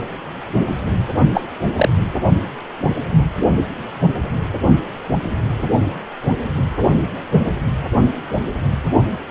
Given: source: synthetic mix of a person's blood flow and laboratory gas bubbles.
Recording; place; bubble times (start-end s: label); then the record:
Doppler ultrasound of blood flow; precordium
1.33-1.43 s: bubbles
1.77-1.89 s: bubbles
From the record:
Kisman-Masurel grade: 113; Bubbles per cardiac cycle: 1 to 2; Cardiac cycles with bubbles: 1 to 10%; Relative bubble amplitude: loud (0.450 to 0.775); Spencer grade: 1 (occasional bubble signal discernible with the cardiac motion signal, with majority of cardiac periods free of bubbles); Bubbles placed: only in the low amplitude regions of the cardiac cycle